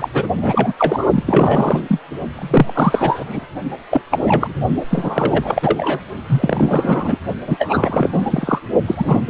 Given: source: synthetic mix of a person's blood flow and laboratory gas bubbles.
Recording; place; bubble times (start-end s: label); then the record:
Doppler ultrasound of blood flow; precordium
0.00-0.08 s: bubbles
0.13-0.28 s: bubbles
0.41-0.73 s: bubbles
0.77-1.23 s: bubbles
1.26-1.99 s: bubbles
2.35-3.46 s: bubbles
3.91-4.01 s: bubbles
4.11-4.54 s: bubbles
4.90-6.00 s: bubbles
6.26-7.18 s: bubbles
7.46-8.10 s: bubbles
8.12-8.59 s: bubbles
8.88-9.21 s: bubbles
From the record:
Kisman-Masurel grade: 343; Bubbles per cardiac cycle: rolling drumbeat, 9 or more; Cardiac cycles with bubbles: 100%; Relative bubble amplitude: loud (0.450 to 0.775); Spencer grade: 3 (all of the cardiac periods contain showers or single bubble signals, but not dominating or overriding the cardiac motion signals); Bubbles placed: only in the low amplitude regions of the cardiac cycle